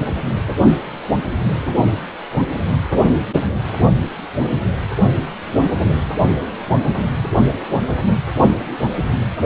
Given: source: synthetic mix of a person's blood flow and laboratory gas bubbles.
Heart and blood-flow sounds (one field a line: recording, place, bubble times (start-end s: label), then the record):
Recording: Doppler ultrasound of blood flow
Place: precordium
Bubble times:
no bubbles
From the record:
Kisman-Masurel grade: 000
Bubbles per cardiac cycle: 0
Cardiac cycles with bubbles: 0%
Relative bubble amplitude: no bubbles discernible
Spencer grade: 0 (complete lack of bubble signals)